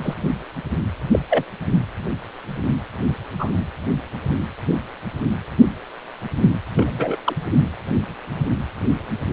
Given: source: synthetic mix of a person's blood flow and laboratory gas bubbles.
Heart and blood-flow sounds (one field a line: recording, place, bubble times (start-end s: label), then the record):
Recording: Doppler ultrasound of blood flow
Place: precordium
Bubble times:
0.03-0.15 s: bubbles
1.11-1.19 s: bubbles
1.29-1.45 s: bubbles
3.38-3.51 s: bubbles
6.76-7.17 s: bubbles
7.24-7.36 s: bubbles
From the record:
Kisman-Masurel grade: 122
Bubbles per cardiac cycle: 1 to 2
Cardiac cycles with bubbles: 10 to 50%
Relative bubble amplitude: moderate (0.250 to 0.450)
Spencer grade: 2 (many but less than half of the cardiac periods contain bubble signals, singularly or in groups)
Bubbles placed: anywhere in the cardiac cycle